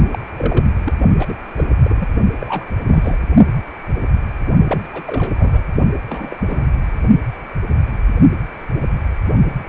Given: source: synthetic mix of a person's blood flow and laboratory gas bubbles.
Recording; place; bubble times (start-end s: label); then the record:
Doppler ultrasound of blood flow; precordium
0.03-0.18 s: bubbles
0.38-0.65 s: bubbles
0.83-0.94 s: bubbles
1.19-1.34 s: bubbles
1.57-1.65 s: bubbles
1.82-2.08 s: bubbles
2.40-2.66 s: bubbles
2.85-3.18 s: bubbles
4.67-4.88 s: bubbles
4.92-5.62 s: bubbles
6.09-6.37 s: bubbles
6.48-6.67 s: bubbles
From the record:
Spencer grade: 3 (all of the cardiac periods contain showers or single bubble signals, but not dominating or overriding the cardiac motion signals); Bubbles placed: only in the low amplitude regions of the cardiac cycle